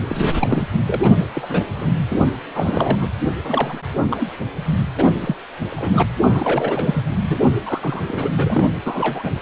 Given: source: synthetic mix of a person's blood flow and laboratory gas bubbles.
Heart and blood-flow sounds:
Doppler ultrasound of blood flow; precordium
0.07-0.68 s: bubbles
0.86-1.11 s: bubbles
1.17-1.27 s: bubbles
1.35-1.68 s: bubbles
1.76-1.91 s: bubbles
2.10-2.20 s: bubbles
2.54-3.08 s: bubbles
3.44-3.79 s: bubbles
4.01-4.29 s: bubbles
4.96-5.13 s: bubbles
5.20-5.35 s: bubbles
5.71-6.02 s: bubbles
6.21-7.05 s: bubbles
7.27-7.41 s: bubbles
7.65-8.04 s: bubbles
8.07-8.30 s: bubbles
8.37-8.77 s: bubbles
8.85-9.30 s: bubbles
From the record:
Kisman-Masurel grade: 342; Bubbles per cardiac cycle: rolling drumbeat, 9 or more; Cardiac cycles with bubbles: 100%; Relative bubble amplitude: moderate (0.250 to 0.450); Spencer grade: 3 (all of the cardiac periods contain showers or single bubble signals, but not dominating or overriding the cardiac motion signals); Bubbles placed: anywhere in the cardiac cycle

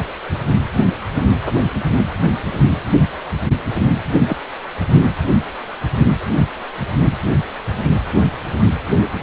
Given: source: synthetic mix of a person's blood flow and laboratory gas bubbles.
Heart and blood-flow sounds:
Doppler ultrasound of blood flow; precordium
4.27-4.37 s: bubbles
From the record:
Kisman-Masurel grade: 113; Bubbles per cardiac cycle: 1 to 2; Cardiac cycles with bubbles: 1 to 10%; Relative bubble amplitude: loud (0.450 to 0.775); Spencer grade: 1 (occasional bubble signal discernible with the cardiac motion signal, with majority of cardiac periods free of bubbles); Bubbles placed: anywhere in the cardiac cycle

